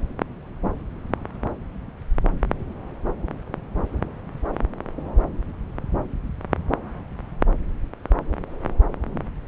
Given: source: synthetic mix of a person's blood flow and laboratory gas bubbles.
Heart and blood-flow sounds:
Doppler ultrasound of blood flow; subclavian vein
no bubbles
From the record:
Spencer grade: 0 (complete lack of bubble signals)

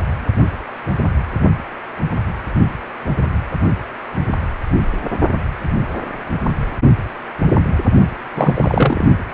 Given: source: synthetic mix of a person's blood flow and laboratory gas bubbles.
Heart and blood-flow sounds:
Doppler ultrasound of blood flow; precordium
8.35-9.04 s: bubbles
From the record:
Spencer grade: 1 (occasional bubble signal discernible with the cardiac motion signal, with majority of cardiac periods free of bubbles); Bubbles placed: only in the low amplitude regions of the cardiac cycle

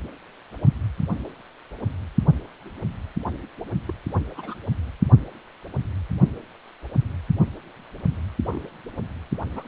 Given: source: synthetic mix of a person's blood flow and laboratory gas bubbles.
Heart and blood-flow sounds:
Doppler ultrasound of blood flow; precordium
3.88-3.91 s: bubbles
4.35-4.55 s: bubbles
8.51-8.62 s: bubbles
9.54-9.64 s: bubbles
From the record:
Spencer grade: 2 (many but less than half of the cardiac periods contain bubble signals, singularly or in groups); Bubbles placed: only in the low amplitude regions of the cardiac cycle

